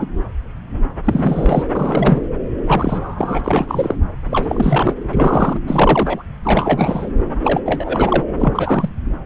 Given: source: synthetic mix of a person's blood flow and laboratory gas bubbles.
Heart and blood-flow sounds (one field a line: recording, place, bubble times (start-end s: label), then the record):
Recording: Doppler ultrasound of blood flow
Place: subclavian vein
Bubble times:
0.00-0.07 s: bubbles
1.05-1.64 s: bubbles
1.75-2.22 s: bubbles
2.66-3.40 s: bubbles
3.44-3.98 s: bubbles
4.30-4.94 s: bubbles
5.13-5.58 s: bubbles
5.67-6.23 s: bubbles
6.43-7.10 s: bubbles
7.43-7.61 s: bubbles
7.65-8.24 s: bubbles
8.38-8.89 s: bubbles
From the record:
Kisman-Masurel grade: 333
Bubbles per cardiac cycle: rolling drumbeat, 9 or more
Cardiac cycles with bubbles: 50 to 99%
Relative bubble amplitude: loud (0.450 to 0.775)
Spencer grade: 3 (all of the cardiac periods contain showers or single bubble signals, but not dominating or overriding the cardiac motion signals)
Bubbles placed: anywhere in the cardiac cycle